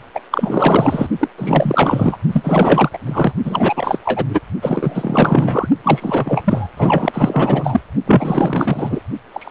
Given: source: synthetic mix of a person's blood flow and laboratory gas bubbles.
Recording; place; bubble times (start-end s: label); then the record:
Doppler ultrasound of blood flow; precordium
0.14-0.20 s: bubbles
0.31-1.08 s: bubbles
1.19-1.28 s: bubbles
1.38-2.17 s: bubbles
2.32-2.89 s: bubbles
2.93-2.99 s: bubbles
3.05-3.33 s: bubbles
3.45-3.98 s: bubbles
4.05-4.25 s: bubbles
4.29-4.40 s: bubbles
4.61-5.69 s: bubbles
5.83-6.69 s: bubbles
6.77-7.81 s: bubbles
8.06-9.00 s: bubbles
9.33-9.51 s: bubbles
From the record:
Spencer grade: 4 (maximum detectable bubble signal sounding continuously throughout systole and diastole of every cardiac period, and overriding the amplitude of the normal cardiac signals); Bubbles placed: only in the low amplitude regions of the cardiac cycle